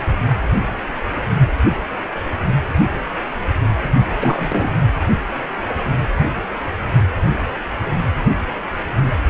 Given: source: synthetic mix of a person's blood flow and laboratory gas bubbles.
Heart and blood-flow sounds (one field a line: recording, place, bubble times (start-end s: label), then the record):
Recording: Doppler ultrasound of blood flow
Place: precordium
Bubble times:
4.20-4.70 s: bubbles
From the record:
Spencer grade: 1 (occasional bubble signal discernible with the cardiac motion signal, with majority of cardiac periods free of bubbles)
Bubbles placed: only in the low amplitude regions of the cardiac cycle